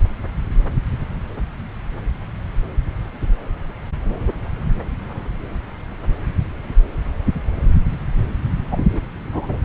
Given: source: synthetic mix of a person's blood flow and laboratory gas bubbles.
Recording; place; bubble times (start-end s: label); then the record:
Doppler ultrasound of blood flow; subclavian vein
8.71-8.84 s: bubbles
8.93-9.12 s: bubbles
9.32-9.57 s: bubbles
From the record:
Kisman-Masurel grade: 213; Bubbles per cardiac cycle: several, 3 to 8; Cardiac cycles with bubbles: 1 to 10%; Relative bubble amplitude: loud (0.450 to 0.775); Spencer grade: 1 (occasional bubble signal discernible with the cardiac motion signal, with majority of cardiac periods free of bubbles); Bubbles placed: anywhere in the cardiac cycle